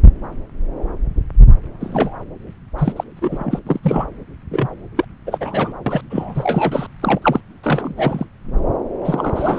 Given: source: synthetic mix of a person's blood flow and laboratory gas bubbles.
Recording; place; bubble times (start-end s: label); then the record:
Doppler ultrasound of blood flow; subclavian vein
1.80-2.16 s: bubbles
2.78-2.93 s: bubbles
2.96-3.04 s: bubbles
3.17-3.59 s: bubbles
3.67-3.79 s: bubbles
3.83-4.07 s: bubbles
4.51-4.67 s: bubbles
4.97-5.04 s: bubbles
5.26-5.72 s: bubbles
5.86-6.01 s: bubbles
6.10-6.87 s: bubbles
7.01-7.19 s: bubbles
7.22-7.40 s: bubbles
7.63-7.94 s: bubbles
7.96-8.25 s: bubbles
9.04-9.59 s: bubbles
From the record:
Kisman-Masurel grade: 333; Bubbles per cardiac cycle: rolling drumbeat, 9 or more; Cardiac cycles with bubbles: 50 to 99%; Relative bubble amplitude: loud (0.450 to 0.775); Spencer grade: 3 (all of the cardiac periods contain showers or single bubble signals, but not dominating or overriding the cardiac motion signals); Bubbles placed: anywhere in the cardiac cycle